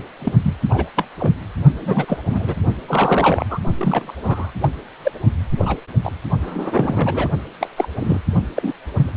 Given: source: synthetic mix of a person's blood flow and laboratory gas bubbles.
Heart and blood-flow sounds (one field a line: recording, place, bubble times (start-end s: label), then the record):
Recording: Doppler ultrasound of blood flow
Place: precordium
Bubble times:
0.20-0.32 s: bubbles
0.43-0.54 s: bubbles
0.69-0.85 s: bubbles
0.96-1.06 s: bubbles
1.17-1.33 s: bubbles
1.81-2.18 s: bubbles
2.29-2.55 s: bubbles
2.88-3.45 s: bubbles
3.50-3.59 s: bubbles
3.77-4.15 s: bubbles
4.21-4.50 s: bubbles
4.61-4.69 s: bubbles
5.03-5.12 s: bubbles
5.58-5.76 s: bubbles
6.04-6.12 s: bubbles
6.42-7.29 s: bubbles
7.61-7.68 s: bubbles
7.77-7.89 s: bubbles
8.00-8.19 s: bubbles
8.56-8.72 s: bubbles
8.97-9.09 s: bubbles
From the record:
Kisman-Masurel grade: 232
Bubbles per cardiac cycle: several, 3 to 8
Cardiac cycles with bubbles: 50 to 99%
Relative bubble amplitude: moderate (0.250 to 0.450)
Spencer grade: 3 (all of the cardiac periods contain showers or single bubble signals, but not dominating or overriding the cardiac motion signals)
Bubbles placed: only in the low amplitude regions of the cardiac cycle